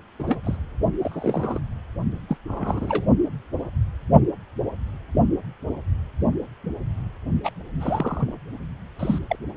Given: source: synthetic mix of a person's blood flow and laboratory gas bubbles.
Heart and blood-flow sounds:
Doppler ultrasound of blood flow; precordium
0.19-0.24 s: bubbles
0.27-0.40 s: bubbles
0.44-0.57 s: bubbles
1.02-1.59 s: bubbles
2.28-2.37 s: bubbles
2.47-3.07 s: bubbles
7.43-7.52 s: bubbles
7.80-8.35 s: bubbles
8.99-9.18 s: bubbles
9.29-9.36 s: bubbles
From the record:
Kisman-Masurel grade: 232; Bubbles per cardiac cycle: several, 3 to 8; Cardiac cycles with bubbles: 50 to 99%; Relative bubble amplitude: moderate (0.250 to 0.450); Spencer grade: 3 (all of the cardiac periods contain showers or single bubble signals, but not dominating or overriding the cardiac motion signals); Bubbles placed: only in the low amplitude regions of the cardiac cycle

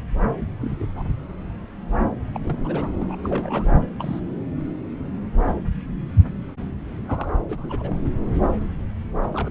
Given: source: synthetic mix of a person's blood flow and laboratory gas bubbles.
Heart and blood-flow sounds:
Doppler ultrasound of blood flow; subclavian vein
0.61-0.88 s: bubbles
0.95-1.12 s: bubbles
2.34-2.40 s: bubbles
2.42-2.92 s: bubbles
2.98-3.16 s: bubbles
3.23-3.66 s: bubbles
3.98-4.20 s: bubbles
7.08-7.46 s: bubbles
7.49-7.97 s: bubbles
9.21-9.50 s: bubbles
From the record:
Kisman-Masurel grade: 221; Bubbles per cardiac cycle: several, 3 to 8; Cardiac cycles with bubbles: 10 to 50%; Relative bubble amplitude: barely perceptible (0.100 to 0.250); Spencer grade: 2 (many but less than half of the cardiac periods contain bubble signals, singularly or in groups); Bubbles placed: anywhere in the cardiac cycle

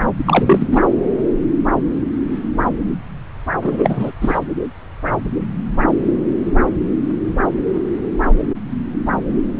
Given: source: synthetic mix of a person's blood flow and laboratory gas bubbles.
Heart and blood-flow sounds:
Doppler ultrasound of blood flow; subclavian vein
0.26-0.67 s: bubbles
0.71-0.85 s: bubbles
3.63-4.12 s: bubbles
4.21-4.39 s: bubbles
From the record:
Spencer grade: 1 (occasional bubble signal discernible with the cardiac motion signal, with majority of cardiac periods free of bubbles); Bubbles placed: anywhere in the cardiac cycle

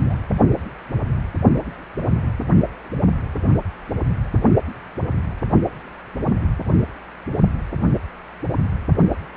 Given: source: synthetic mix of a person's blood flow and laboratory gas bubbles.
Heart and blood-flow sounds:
Doppler ultrasound of blood flow; precordium
0.00-0.15 s: bubbles
From the record:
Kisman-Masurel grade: 211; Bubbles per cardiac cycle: several, 3 to 8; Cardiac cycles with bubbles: 1 to 10%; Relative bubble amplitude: barely perceptible (0.100 to 0.250); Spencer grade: 1 (occasional bubble signal discernible with the cardiac motion signal, with majority of cardiac periods free of bubbles); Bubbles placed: anywhere in the cardiac cycle

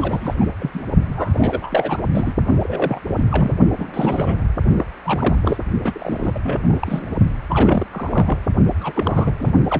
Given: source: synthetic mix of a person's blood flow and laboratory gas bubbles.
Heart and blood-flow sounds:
Doppler ultrasound of blood flow; precordium
0.00-0.34 s: bubbles
0.40-0.45 s: bubbles
0.59-0.71 s: bubbles
0.74-0.82 s: bubbles
0.98-2.01 s: bubbles
2.12-2.33 s: bubbles
2.62-3.01 s: bubbles
3.08-3.24 s: bubbles
3.31-3.56 s: bubbles
3.77-4.35 s: bubbles
4.76-4.84 s: bubbles
5.04-5.36 s: bubbles
5.42-5.56 s: bubbles
5.84-7.16 s: bubbles
7.49-7.85 s: bubbles
7.91-8.38 s: bubbles
8.80-9.35 s: bubbles
9.39-9.52 s: bubbles
9.67-9.80 s: bubbles
From the record:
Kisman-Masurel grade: 332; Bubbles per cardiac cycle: rolling drumbeat, 9 or more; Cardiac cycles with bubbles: 50 to 99%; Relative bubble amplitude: moderate (0.250 to 0.450); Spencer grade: 3 (all of the cardiac periods contain showers or single bubble signals, but not dominating or overriding the cardiac motion signals); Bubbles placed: only in the low amplitude regions of the cardiac cycle

